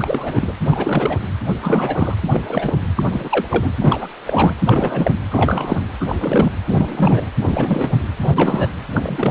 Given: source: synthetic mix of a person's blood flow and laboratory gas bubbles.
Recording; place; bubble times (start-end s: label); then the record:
Doppler ultrasound of blood flow; precordium
0.00-0.52 s: bubbles
0.70-1.24 s: bubbles
1.62-2.15 s: bubbles
2.32-2.45 s: bubbles
2.48-2.75 s: bubbles
2.96-3.03 s: bubbles
3.11-3.72 s: bubbles
3.80-4.08 s: bubbles
4.25-4.54 s: bubbles
4.66-5.11 s: bubbles
5.31-5.80 s: bubbles
6.00-6.51 s: bubbles
6.68-7.29 s: bubbles
7.40-7.96 s: bubbles
8.22-8.72 s: bubbles
8.94-9.30 s: bubbles
From the record:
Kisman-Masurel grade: 343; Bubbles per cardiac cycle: rolling drumbeat, 9 or more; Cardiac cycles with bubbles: 100%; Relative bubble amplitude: loud (0.450 to 0.775); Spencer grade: 3 (all of the cardiac periods contain showers or single bubble signals, but not dominating or overriding the cardiac motion signals); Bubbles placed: anywhere in the cardiac cycle